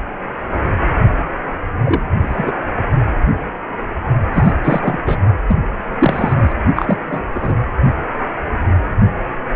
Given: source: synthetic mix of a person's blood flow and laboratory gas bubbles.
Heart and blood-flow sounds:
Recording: Doppler ultrasound of blood flow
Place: precordium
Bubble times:
1.84-2.01 s: bubbles
2.21-2.52 s: bubbles
4.34-4.53 s: bubbles
4.63-4.99 s: bubbles
5.05-5.19 s: bubbles
5.48-5.59 s: bubbles
6.00-6.53 s: bubbles
6.75-6.98 s: bubbles
7.07-7.21 s: bubbles
7.34-7.62 s: bubbles
From the record:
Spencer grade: 2 (many but less than half of the cardiac periods contain bubble signals, singularly or in groups)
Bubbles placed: only in the low amplitude regions of the cardiac cycle

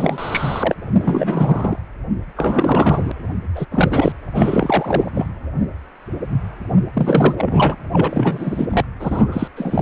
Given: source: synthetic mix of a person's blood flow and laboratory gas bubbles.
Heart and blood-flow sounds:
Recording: Doppler ultrasound of blood flow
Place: precordium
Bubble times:
0.00-0.73 s: bubbles
0.98-1.79 s: bubbles
2.36-3.11 s: bubbles
3.55-3.65 s: bubbles
3.71-4.12 s: bubbles
4.35-5.26 s: bubbles
6.93-7.76 s: bubbles
7.92-8.85 s: bubbles
9.00-9.48 s: bubbles
9.56-9.82 s: bubbles
From the record:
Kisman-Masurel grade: 333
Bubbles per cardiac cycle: rolling drumbeat, 9 or more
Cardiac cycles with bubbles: 50 to 99%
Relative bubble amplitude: loud (0.450 to 0.775)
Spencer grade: 3 (all of the cardiac periods contain showers or single bubble signals, but not dominating or overriding the cardiac motion signals)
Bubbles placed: anywhere in the cardiac cycle

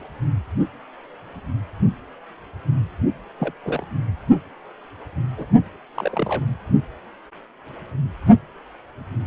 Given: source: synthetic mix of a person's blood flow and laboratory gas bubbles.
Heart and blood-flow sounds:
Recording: Doppler ultrasound of blood flow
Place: precordium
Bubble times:
3.38-3.54 s: bubbles
3.64-3.84 s: bubbles
5.37-5.46 s: bubbles
5.94-6.44 s: bubbles
From the record:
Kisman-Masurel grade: 221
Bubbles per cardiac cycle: several, 3 to 8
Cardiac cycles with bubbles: 10 to 50%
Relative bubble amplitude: barely perceptible (0.100 to 0.250)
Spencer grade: 2 (many but less than half of the cardiac periods contain bubble signals, singularly or in groups)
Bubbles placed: anywhere in the cardiac cycle

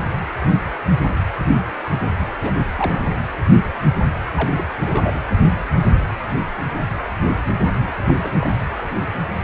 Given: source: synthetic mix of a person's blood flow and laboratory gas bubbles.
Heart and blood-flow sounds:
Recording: Doppler ultrasound of blood flow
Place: precordium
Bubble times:
2.40-2.52 s: bubbles
2.76-3.02 s: bubbles
4.36-4.67 s: bubbles
4.85-5.21 s: bubbles
7.81-7.94 s: bubbles
8.04-8.14 s: bubbles
8.22-8.32 s: bubbles
8.34-8.49 s: bubbles
From the record:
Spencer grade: 2 (many but less than half of the cardiac periods contain bubble signals, singularly or in groups)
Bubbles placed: anywhere in the cardiac cycle

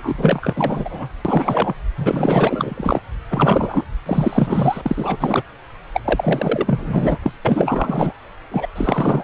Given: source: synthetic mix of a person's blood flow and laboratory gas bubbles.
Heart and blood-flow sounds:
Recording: Doppler ultrasound of blood flow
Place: subclavian vein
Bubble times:
0.00-1.08 s: bubbles
1.25-1.75 s: bubbles
1.97-3.00 s: bubbles
3.29-3.84 s: bubbles
4.06-4.82 s: bubbles
4.86-5.17 s: bubbles
5.20-5.42 s: bubbles
5.93-6.00 s: bubbles
6.04-7.18 s: bubbles
7.22-7.32 s: bubbles
7.45-8.13 s: bubbles
8.51-8.67 s: bubbles
8.76-9.24 s: bubbles
From the record:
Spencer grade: 4 (maximum detectable bubble signal sounding continuously throughout systole and diastole of every cardiac period, and overriding the amplitude of the normal cardiac signals)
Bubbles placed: anywhere in the cardiac cycle

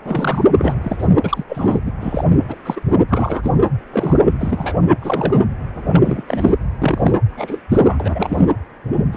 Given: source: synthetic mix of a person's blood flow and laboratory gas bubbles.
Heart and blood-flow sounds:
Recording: Doppler ultrasound of blood flow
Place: precordium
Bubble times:
0.05-0.45 s: bubbles
0.58-0.78 s: bubbles
0.83-1.09 s: bubbles
1.24-1.44 s: bubbles
1.48-1.78 s: bubbles
1.85-1.92 s: bubbles
2.00-2.25 s: bubbles
2.48-2.56 s: bubbles
2.65-2.81 s: bubbles
3.09-3.55 s: bubbles
3.93-4.27 s: bubbles
4.40-4.75 s: bubbles
5.01-5.40 s: bubbles
5.85-6.00 s: bubbles
6.03-6.22 s: bubbles
6.27-6.53 s: bubbles
6.81-7.12 s: bubbles
7.29-7.59 s: bubbles
7.70-8.50 s: bubbles
9.12-9.17 s: bubbles
From the record:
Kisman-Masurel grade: 232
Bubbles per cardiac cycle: several, 3 to 8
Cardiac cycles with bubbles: 50 to 99%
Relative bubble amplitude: moderate (0.250 to 0.450)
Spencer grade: 3 (all of the cardiac periods contain showers or single bubble signals, but not dominating or overriding the cardiac motion signals)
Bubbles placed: anywhere in the cardiac cycle

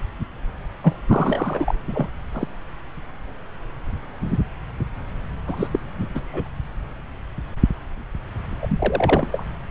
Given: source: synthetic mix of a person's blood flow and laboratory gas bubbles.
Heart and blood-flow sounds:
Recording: Doppler ultrasound of blood flow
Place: subclavian vein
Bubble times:
0.83-1.01 s: bubbles
1.08-1.75 s: bubbles
1.88-2.07 s: bubbles
2.32-2.47 s: bubbles
5.47-5.67 s: bubbles
5.72-5.79 s: bubbles
6.14-6.21 s: bubbles
6.27-6.50 s: bubbles
8.62-9.45 s: bubbles
From the record:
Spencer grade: 3 (all of the cardiac periods contain showers or single bubble signals, but not dominating or overriding the cardiac motion signals)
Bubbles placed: anywhere in the cardiac cycle

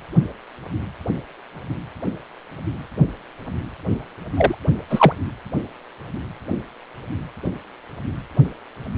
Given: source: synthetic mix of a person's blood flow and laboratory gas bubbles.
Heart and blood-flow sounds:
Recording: Doppler ultrasound of blood flow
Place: precordium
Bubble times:
4.37-4.55 s: bubbles
4.90-5.12 s: bubbles
From the record:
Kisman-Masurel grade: 213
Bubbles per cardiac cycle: several, 3 to 8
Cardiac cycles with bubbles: 1 to 10%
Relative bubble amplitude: loud (0.450 to 0.775)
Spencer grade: 1 (occasional bubble signal discernible with the cardiac motion signal, with majority of cardiac periods free of bubbles)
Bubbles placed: anywhere in the cardiac cycle

